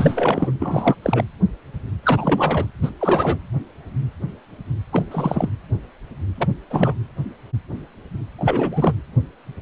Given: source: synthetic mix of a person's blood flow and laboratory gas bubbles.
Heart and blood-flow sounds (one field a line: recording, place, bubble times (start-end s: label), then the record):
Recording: Doppler ultrasound of blood flow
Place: precordium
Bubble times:
0.00-0.51 s: bubbles
0.59-0.95 s: bubbles
1.02-1.25 s: bubbles
2.03-2.66 s: bubbles
2.82-2.90 s: bubbles
3.00-3.38 s: bubbles
4.92-5.49 s: bubbles
6.38-6.48 s: bubbles
6.70-6.95 s: bubbles
8.39-8.93 s: bubbles
From the record:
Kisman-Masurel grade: 332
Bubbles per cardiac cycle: rolling drumbeat, 9 or more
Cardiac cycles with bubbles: 50 to 99%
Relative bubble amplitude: moderate (0.250 to 0.450)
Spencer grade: 3 (all of the cardiac periods contain showers or single bubble signals, but not dominating or overriding the cardiac motion signals)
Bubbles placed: anywhere in the cardiac cycle